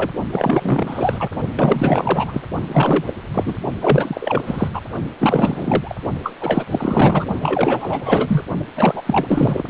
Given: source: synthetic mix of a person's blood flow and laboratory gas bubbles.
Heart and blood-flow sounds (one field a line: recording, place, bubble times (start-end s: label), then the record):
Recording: Doppler ultrasound of blood flow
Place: precordium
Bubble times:
0.00-0.10 s: bubbles
0.32-1.29 s: bubbles
1.56-2.42 s: bubbles
2.66-3.13 s: bubbles
3.33-3.58 s: bubbles
3.80-4.42 s: bubbles
4.46-4.69 s: bubbles
4.73-4.82 s: bubbles
5.20-5.96 s: bubbles
6.23-6.33 s: bubbles
6.40-6.65 s: bubbles
6.71-7.26 s: bubbles
7.41-8.43 s: bubbles
8.76-9.03 s: bubbles
9.06-9.64 s: bubbles
From the record:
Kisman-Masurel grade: 444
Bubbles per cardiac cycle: continuous sound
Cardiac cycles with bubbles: 100%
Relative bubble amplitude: maximal (0.775 to 0.999)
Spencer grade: 4 (maximum detectable bubble signal sounding continuously throughout systole and diastole of every cardiac period, and overriding the amplitude of the normal cardiac signals)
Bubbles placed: only in the low amplitude regions of the cardiac cycle